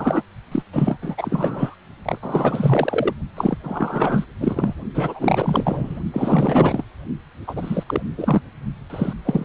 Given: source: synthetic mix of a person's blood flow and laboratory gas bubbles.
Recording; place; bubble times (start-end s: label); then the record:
Doppler ultrasound of blood flow; precordium
0.00-0.22 s: bubbles
0.51-0.62 s: bubbles
0.72-0.99 s: bubbles
1.02-1.75 s: bubbles
2.05-2.18 s: bubbles
2.22-3.13 s: bubbles
3.37-3.58 s: bubbles
3.64-4.25 s: bubbles
4.41-4.75 s: bubbles
4.94-5.99 s: bubbles
6.13-6.84 s: bubbles
7.47-7.84 s: bubbles
7.87-8.02 s: bubbles
8.18-8.42 s: bubbles
8.89-9.13 s: bubbles
9.25-9.44 s: bubbles
From the record:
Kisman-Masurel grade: 444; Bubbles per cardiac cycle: continuous sound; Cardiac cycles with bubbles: 100%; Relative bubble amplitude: maximal (0.775 to 0.999); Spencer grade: 4 (maximum detectable bubble signal sounding continuously throughout systole and diastole of every cardiac period, and overriding the amplitude of the normal cardiac signals); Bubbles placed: only in the low amplitude regions of the cardiac cycle